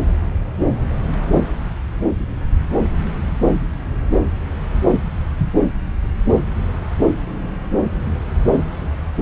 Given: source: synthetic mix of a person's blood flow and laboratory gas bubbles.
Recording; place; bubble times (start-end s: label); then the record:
Doppler ultrasound of blood flow; subclavian vein
no bubbles
From the record:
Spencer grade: 0 (complete lack of bubble signals)